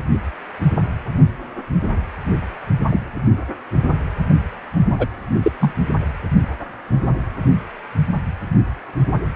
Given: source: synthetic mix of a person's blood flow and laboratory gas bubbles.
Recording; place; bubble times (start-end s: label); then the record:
Doppler ultrasound of blood flow; precordium
2.89-3.00 s: bubbles
4.98-5.07 s: bubbles
5.43-5.52 s: bubbles
5.60-5.74 s: bubbles
From the record:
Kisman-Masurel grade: 123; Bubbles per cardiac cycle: 1 to 2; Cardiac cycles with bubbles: 10 to 50%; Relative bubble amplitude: loud (0.450 to 0.775); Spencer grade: 2 (many but less than half of the cardiac periods contain bubble signals, singularly or in groups); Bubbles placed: anywhere in the cardiac cycle